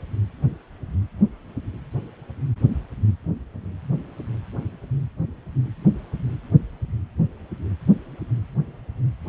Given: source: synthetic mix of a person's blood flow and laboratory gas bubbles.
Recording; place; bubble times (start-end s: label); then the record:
Doppler ultrasound of blood flow; precordium
no bubbles
From the record:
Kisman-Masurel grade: 000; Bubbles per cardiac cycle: 0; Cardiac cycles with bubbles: 0%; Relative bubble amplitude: no bubbles discernible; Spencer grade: 0 (complete lack of bubble signals)